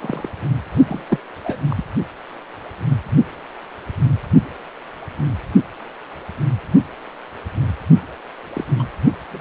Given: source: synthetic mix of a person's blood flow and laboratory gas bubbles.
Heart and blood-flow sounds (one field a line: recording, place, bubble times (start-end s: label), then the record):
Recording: Doppler ultrasound of blood flow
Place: precordium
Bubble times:
0.01-0.29 s: bubbles
0.88-1.04 s: bubbles
1.09-1.20 s: bubbles
1.44-1.60 s: bubbles
1.70-1.84 s: bubbles
8.54-8.64 s: bubbles
8.79-8.83 s: bubbles
9.30-9.41 s: bubbles
From the record:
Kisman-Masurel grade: 221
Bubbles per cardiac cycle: several, 3 to 8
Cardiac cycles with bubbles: 10 to 50%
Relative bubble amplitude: barely perceptible (0.100 to 0.250)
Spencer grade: 2 (many but less than half of the cardiac periods contain bubble signals, singularly or in groups)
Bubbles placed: only in the low amplitude regions of the cardiac cycle